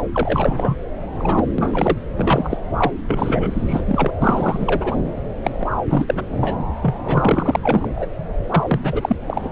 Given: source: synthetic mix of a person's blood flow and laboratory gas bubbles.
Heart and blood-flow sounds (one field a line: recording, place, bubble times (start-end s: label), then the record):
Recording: Doppler ultrasound of blood flow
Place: subclavian vein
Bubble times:
0.12-0.78 s: bubbles
1.19-1.44 s: bubbles
1.58-1.98 s: bubbles
2.15-2.57 s: bubbles
2.77-2.92 s: bubbles
3.07-4.12 s: bubbles
4.22-4.97 s: bubbles
5.44-5.68 s: bubbles
5.88-6.24 s: bubbles
6.41-6.57 s: bubbles
6.82-6.96 s: bubbles
7.04-7.60 s: bubbles
7.62-8.06 s: bubbles
8.51-8.63 s: bubbles
8.67-8.80 s: bubbles
8.83-9.16 s: bubbles
9.27-9.52 s: bubbles
From the record:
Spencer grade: 3 (all of the cardiac periods contain showers or single bubble signals, but not dominating or overriding the cardiac motion signals)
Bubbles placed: anywhere in the cardiac cycle